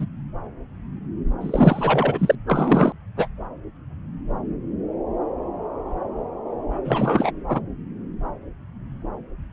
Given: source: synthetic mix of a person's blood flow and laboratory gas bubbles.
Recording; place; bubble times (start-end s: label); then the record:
Doppler ultrasound of blood flow; subclavian vein
0.00-0.06 s: bubbles
1.41-2.35 s: bubbles
2.47-2.92 s: bubbles
3.17-3.27 s: bubbles
6.85-7.31 s: bubbles
7.49-7.60 s: bubbles
From the record:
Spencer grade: 3 (all of the cardiac periods contain showers or single bubble signals, but not dominating or overriding the cardiac motion signals); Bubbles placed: anywhere in the cardiac cycle